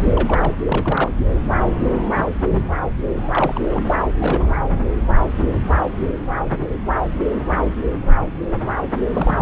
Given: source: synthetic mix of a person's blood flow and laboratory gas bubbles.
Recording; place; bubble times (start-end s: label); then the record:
Doppler ultrasound of blood flow; subclavian vein
0.03-0.13 s: bubbles
0.15-0.52 s: bubbles
0.66-1.12 s: bubbles
3.16-3.65 s: bubbles
3.69-3.97 s: bubbles
4.19-4.56 s: bubbles
9.12-9.42 s: bubbles
From the record:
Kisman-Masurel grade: 232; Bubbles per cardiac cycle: several, 3 to 8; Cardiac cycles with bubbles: 50 to 99%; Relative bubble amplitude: moderate (0.250 to 0.450); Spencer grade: 3 (all of the cardiac periods contain showers or single bubble signals, but not dominating or overriding the cardiac motion signals); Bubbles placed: anywhere in the cardiac cycle